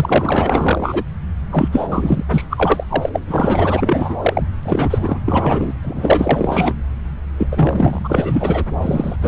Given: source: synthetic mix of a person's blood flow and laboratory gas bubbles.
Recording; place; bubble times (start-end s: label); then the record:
Doppler ultrasound of blood flow; subclavian vein
0.00-1.03 s: bubbles
1.50-1.69 s: bubbles
1.72-2.24 s: bubbles
2.30-2.44 s: bubbles
2.50-2.84 s: bubbles
2.89-3.10 s: bubbles
3.12-3.19 s: bubbles
3.27-4.16 s: bubbles
4.21-4.43 s: bubbles
4.63-5.21 s: bubbles
5.25-5.73 s: bubbles
5.82-6.73 s: bubbles
7.38-7.47 s: bubbles
7.51-8.64 s: bubbles
8.81-9.16 s: bubbles
9.22-9.28 s: bubbles
From the record:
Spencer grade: 4 (maximum detectable bubble signal sounding continuously throughout systole and diastole of every cardiac period, and overriding the amplitude of the normal cardiac signals); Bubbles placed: anywhere in the cardiac cycle